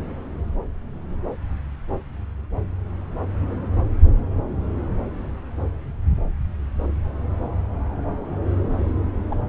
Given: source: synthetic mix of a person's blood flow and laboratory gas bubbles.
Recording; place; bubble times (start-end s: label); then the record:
Doppler ultrasound of blood flow; subclavian vein
9.28-9.36 s: bubbles
From the record:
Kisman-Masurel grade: 111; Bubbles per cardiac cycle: 1 to 2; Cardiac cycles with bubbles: 1 to 10%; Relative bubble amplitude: barely perceptible (0.100 to 0.250); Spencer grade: 1 (occasional bubble signal discernible with the cardiac motion signal, with majority of cardiac periods free of bubbles); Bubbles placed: anywhere in the cardiac cycle